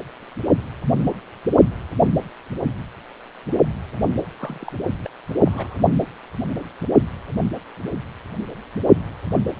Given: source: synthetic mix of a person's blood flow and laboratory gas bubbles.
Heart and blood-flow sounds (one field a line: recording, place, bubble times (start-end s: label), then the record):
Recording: Doppler ultrasound of blood flow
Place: precordium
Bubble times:
4.38-4.73 s: bubbles
5.04-5.08 s: bubbles
5.46-5.78 s: bubbles
From the record:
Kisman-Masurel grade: 211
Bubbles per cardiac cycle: several, 3 to 8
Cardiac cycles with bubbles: 1 to 10%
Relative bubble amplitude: barely perceptible (0.100 to 0.250)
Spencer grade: 1 (occasional bubble signal discernible with the cardiac motion signal, with majority of cardiac periods free of bubbles)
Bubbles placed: anywhere in the cardiac cycle